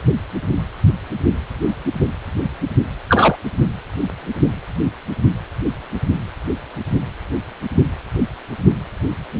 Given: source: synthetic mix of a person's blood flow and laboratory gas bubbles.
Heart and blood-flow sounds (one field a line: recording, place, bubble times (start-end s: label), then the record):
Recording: Doppler ultrasound of blood flow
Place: precordium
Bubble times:
3.09-3.35 s: bubbles
From the record:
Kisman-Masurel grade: 113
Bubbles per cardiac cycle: 1 to 2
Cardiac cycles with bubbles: 1 to 10%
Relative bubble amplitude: loud (0.450 to 0.775)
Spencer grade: 1 (occasional bubble signal discernible with the cardiac motion signal, with majority of cardiac periods free of bubbles)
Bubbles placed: only in the low amplitude regions of the cardiac cycle